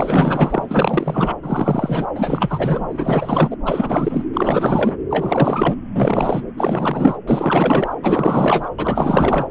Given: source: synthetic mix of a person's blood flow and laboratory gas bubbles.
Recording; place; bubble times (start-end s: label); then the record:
Doppler ultrasound of blood flow; subclavian vein
0.00-1.35 s: bubbles
1.42-2.06 s: bubbles
2.15-2.80 s: bubbles
2.90-3.56 s: bubbles
3.65-4.26 s: bubbles
4.33-4.96 s: bubbles
5.10-5.75 s: bubbles
5.96-6.43 s: bubbles
6.57-7.17 s: bubbles
7.27-7.94 s: bubbles
8.03-8.70 s: bubbles
8.78-9.46 s: bubbles
From the record:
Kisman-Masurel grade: 444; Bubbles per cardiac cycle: continuous sound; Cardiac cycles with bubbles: 100%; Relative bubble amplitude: maximal (0.775 to 0.999); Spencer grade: 4 (maximum detectable bubble signal sounding continuously throughout systole and diastole of every cardiac period, and overriding the amplitude of the normal cardiac signals); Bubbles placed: anywhere in the cardiac cycle